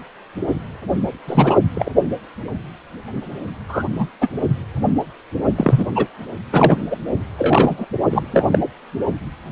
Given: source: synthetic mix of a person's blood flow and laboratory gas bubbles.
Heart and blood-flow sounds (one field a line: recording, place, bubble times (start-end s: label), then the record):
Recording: Doppler ultrasound of blood flow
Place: precordium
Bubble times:
1.27-1.58 s: bubbles
1.74-1.90 s: bubbles
3.69-3.84 s: bubbles
3.98-4.08 s: bubbles
4.21-4.28 s: bubbles
5.57-5.87 s: bubbles
5.94-6.06 s: bubbles
6.52-6.76 s: bubbles
6.90-6.97 s: bubbles
7.38-7.86 s: bubbles
8.11-8.26 s: bubbles
8.32-8.46 s: bubbles
8.52-8.59 s: bubbles
From the record:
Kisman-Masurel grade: 233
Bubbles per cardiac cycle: several, 3 to 8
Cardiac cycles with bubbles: 50 to 99%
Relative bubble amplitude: loud (0.450 to 0.775)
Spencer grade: 3 (all of the cardiac periods contain showers or single bubble signals, but not dominating or overriding the cardiac motion signals)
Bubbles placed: only in the low amplitude regions of the cardiac cycle